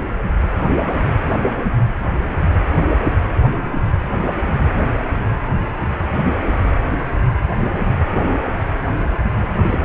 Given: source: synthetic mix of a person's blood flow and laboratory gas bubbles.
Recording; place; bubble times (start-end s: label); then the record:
Doppler ultrasound of blood flow; precordium
9.36-9.85 s: bubbles
From the record:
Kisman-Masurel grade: 221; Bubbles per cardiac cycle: several, 3 to 8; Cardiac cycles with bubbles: 10 to 50%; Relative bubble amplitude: barely perceptible (0.100 to 0.250); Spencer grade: 2 (many but less than half of the cardiac periods contain bubble signals, singularly or in groups); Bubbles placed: anywhere in the cardiac cycle